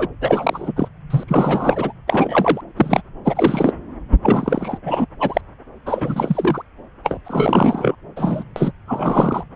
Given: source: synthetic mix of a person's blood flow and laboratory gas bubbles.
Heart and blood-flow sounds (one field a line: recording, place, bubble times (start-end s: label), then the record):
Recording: Doppler ultrasound of blood flow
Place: subclavian vein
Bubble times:
0.00-0.07 s: bubbles
0.21-0.73 s: bubbles
0.75-0.88 s: bubbles
1.10-1.24 s: bubbles
1.27-1.93 s: bubbles
2.07-2.61 s: bubbles
2.76-3.01 s: bubbles
3.25-3.72 s: bubbles
4.21-4.78 s: bubbles
4.85-5.06 s: bubbles
5.20-5.41 s: bubbles
5.86-6.62 s: bubbles
7.04-7.18 s: bubbles
7.25-7.95 s: bubbles
8.16-8.44 s: bubbles
8.56-8.72 s: bubbles
8.87-9.44 s: bubbles
From the record:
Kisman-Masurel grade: 343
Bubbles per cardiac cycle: rolling drumbeat, 9 or more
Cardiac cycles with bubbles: 100%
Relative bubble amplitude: loud (0.450 to 0.775)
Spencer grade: 3 (all of the cardiac periods contain showers or single bubble signals, but not dominating or overriding the cardiac motion signals)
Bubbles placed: anywhere in the cardiac cycle